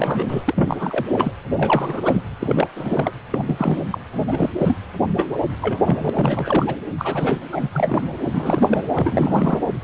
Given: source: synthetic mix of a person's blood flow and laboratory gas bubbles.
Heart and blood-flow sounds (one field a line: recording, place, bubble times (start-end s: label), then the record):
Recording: Doppler ultrasound of blood flow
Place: precordium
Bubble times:
0.00-0.45 s: bubbles
0.48-1.06 s: bubbles
1.12-1.33 s: bubbles
1.56-2.22 s: bubbles
2.40-2.67 s: bubbles
2.75-3.12 s: bubbles
3.32-3.44 s: bubbles
3.46-3.78 s: bubbles
3.90-3.98 s: bubbles
4.12-4.25 s: bubbles
4.27-4.50 s: bubbles
4.58-4.78 s: bubbles
5.16-5.38 s: bubbles
5.61-6.10 s: bubbles
6.13-6.75 s: bubbles
6.98-7.38 s: bubbles
7.51-7.68 s: bubbles
7.72-8.06 s: bubbles
8.23-8.84 s: bubbles
8.94-9.59 s: bubbles
From the record:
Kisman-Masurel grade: 332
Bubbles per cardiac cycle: rolling drumbeat, 9 or more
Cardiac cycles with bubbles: 50 to 99%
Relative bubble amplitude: moderate (0.250 to 0.450)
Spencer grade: 3 (all of the cardiac periods contain showers or single bubble signals, but not dominating or overriding the cardiac motion signals)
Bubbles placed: anywhere in the cardiac cycle